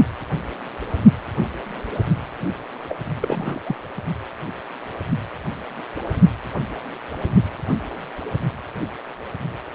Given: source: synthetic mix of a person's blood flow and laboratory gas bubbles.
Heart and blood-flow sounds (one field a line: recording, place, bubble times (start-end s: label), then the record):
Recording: Doppler ultrasound of blood flow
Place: precordium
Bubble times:
2.89-2.96 s: bubbles
3.20-3.60 s: bubbles
3.65-3.76 s: bubbles
From the record:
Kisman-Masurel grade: 212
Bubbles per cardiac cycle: several, 3 to 8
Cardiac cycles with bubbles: 1 to 10%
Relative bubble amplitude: moderate (0.250 to 0.450)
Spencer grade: 1 (occasional bubble signal discernible with the cardiac motion signal, with majority of cardiac periods free of bubbles)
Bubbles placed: only in the low amplitude regions of the cardiac cycle